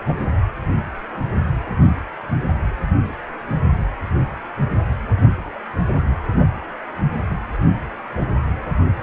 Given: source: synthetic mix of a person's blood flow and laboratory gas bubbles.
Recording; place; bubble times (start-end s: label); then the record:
Doppler ultrasound of blood flow; precordium
0.08-0.14 s: bubbles
From the record:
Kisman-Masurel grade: 123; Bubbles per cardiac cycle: 1 to 2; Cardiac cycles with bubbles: 10 to 50%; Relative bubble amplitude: loud (0.450 to 0.775); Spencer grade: 2 (many but less than half of the cardiac periods contain bubble signals, singularly or in groups); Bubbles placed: anywhere in the cardiac cycle